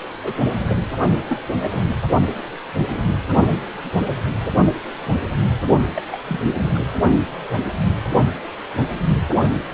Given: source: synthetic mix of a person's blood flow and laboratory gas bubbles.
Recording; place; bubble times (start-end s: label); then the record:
Doppler ultrasound of blood flow; precordium
0.23-0.33 s: bubbles
0.68-0.82 s: bubbles
1.29-1.38 s: bubbles
1.60-1.85 s: bubbles
1.88-1.97 s: bubbles
5.95-6.03 s: bubbles
6.12-6.18 s: bubbles
6.27-6.47 s: bubbles
6.56-6.72 s: bubbles
6.75-6.89 s: bubbles
From the record:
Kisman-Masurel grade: 221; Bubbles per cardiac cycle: several, 3 to 8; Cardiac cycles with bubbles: 10 to 50%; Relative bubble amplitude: barely perceptible (0.100 to 0.250); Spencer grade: 2 (many but less than half of the cardiac periods contain bubble signals, singularly or in groups); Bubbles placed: only in the low amplitude regions of the cardiac cycle